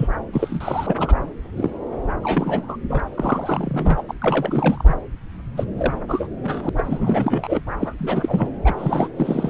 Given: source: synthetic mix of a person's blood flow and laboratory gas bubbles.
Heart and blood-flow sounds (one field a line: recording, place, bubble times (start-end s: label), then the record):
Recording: Doppler ultrasound of blood flow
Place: subclavian vein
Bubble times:
0.00-0.08 s: bubbles
0.33-1.14 s: bubbles
1.56-1.70 s: bubbles
2.23-2.77 s: bubbles
2.89-3.00 s: bubbles
3.15-4.03 s: bubbles
4.08-4.13 s: bubbles
4.21-4.96 s: bubbles
5.56-5.65 s: bubbles
5.77-5.94 s: bubbles
6.07-6.27 s: bubbles
6.43-6.69 s: bubbles
6.77-7.60 s: bubbles
7.78-7.94 s: bubbles
7.99-8.51 s: bubbles
8.65-9.10 s: bubbles
9.17-9.49 s: bubbles
From the record:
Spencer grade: 3 (all of the cardiac periods contain showers or single bubble signals, but not dominating or overriding the cardiac motion signals)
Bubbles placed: anywhere in the cardiac cycle